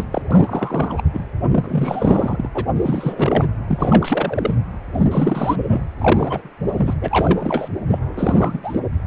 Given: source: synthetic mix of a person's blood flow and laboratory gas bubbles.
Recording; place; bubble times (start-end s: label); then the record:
Doppler ultrasound of blood flow; precordium
0.00-0.04 s: bubbles
0.12-0.22 s: bubbles
0.31-1.03 s: bubbles
1.14-1.25 s: bubbles
1.51-2.48 s: bubbles
2.54-2.66 s: bubbles
2.76-3.46 s: bubbles
3.67-4.55 s: bubbles
4.93-5.06 s: bubbles
5.11-5.81 s: bubbles
5.98-6.49 s: bubbles
6.67-6.95 s: bubbles
7.01-7.68 s: bubbles
7.88-7.99 s: bubbles
8.17-8.59 s: bubbles
8.63-8.80 s: bubbles
From the record:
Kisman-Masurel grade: 343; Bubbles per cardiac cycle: rolling drumbeat, 9 or more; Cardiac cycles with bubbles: 100%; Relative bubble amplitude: loud (0.450 to 0.775); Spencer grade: 3 (all of the cardiac periods contain showers or single bubble signals, but not dominating or overriding the cardiac motion signals); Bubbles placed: anywhere in the cardiac cycle